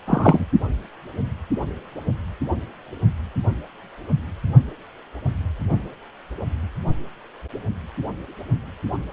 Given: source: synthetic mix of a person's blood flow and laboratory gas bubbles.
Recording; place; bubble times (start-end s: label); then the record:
Doppler ultrasound of blood flow; precordium
0.07-0.45 s: bubbles
From the record:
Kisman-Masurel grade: 223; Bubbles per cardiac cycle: several, 3 to 8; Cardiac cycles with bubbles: 10 to 50%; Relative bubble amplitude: loud (0.450 to 0.775); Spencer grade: 2 (many but less than half of the cardiac periods contain bubble signals, singularly or in groups); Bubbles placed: only in the low amplitude regions of the cardiac cycle